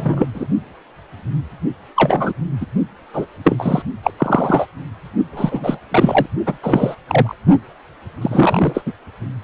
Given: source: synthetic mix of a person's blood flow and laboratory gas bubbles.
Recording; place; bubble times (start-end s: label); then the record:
Doppler ultrasound of blood flow; precordium
0.00-0.28 s: bubbles
0.34-0.47 s: bubbles
1.96-2.33 s: bubbles
2.60-2.65 s: bubbles
3.13-3.26 s: bubbles
3.44-3.83 s: bubbles
4.02-4.10 s: bubbles
4.17-4.66 s: bubbles
5.32-5.79 s: bubbles
5.91-6.26 s: bubbles
6.46-6.57 s: bubbles
6.63-6.95 s: bubbles
7.07-7.35 s: bubbles
8.21-8.83 s: bubbles
8.86-8.93 s: bubbles
From the record:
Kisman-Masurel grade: 233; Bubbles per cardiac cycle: several, 3 to 8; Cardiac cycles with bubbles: 50 to 99%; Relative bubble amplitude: loud (0.450 to 0.775); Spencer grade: 3 (all of the cardiac periods contain showers or single bubble signals, but not dominating or overriding the cardiac motion signals); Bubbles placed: only in the low amplitude regions of the cardiac cycle